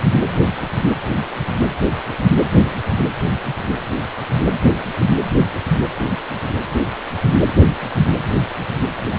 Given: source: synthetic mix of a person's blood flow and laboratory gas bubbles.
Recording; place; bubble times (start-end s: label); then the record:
Doppler ultrasound of blood flow; precordium
no bubbles
From the record:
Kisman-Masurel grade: 000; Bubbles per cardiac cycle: 0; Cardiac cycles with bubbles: 0%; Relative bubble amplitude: no bubbles discernible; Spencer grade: 0 (complete lack of bubble signals)